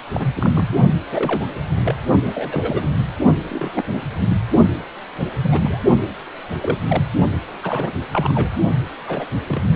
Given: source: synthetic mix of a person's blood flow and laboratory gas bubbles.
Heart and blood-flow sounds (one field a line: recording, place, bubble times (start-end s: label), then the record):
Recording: Doppler ultrasound of blood flow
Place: precordium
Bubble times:
0.13-0.75 s: bubbles
1.11-1.46 s: bubbles
1.83-1.94 s: bubbles
2.24-2.97 s: bubbles
3.50-3.82 s: bubbles
3.86-4.01 s: bubbles
4.27-4.37 s: bubbles
5.20-5.25 s: bubbles
5.43-5.79 s: bubbles
6.62-6.78 s: bubbles
6.89-7.03 s: bubbles
7.63-7.92 s: bubbles
8.12-8.49 s: bubbles
9.07-9.25 s: bubbles
9.46-9.62 s: bubbles
9.72-9.76 s: bubbles
From the record:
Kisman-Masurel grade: 232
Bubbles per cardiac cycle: several, 3 to 8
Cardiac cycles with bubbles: 50 to 99%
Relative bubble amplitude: moderate (0.250 to 0.450)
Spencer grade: 3 (all of the cardiac periods contain showers or single bubble signals, but not dominating or overriding the cardiac motion signals)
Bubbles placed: only in the low amplitude regions of the cardiac cycle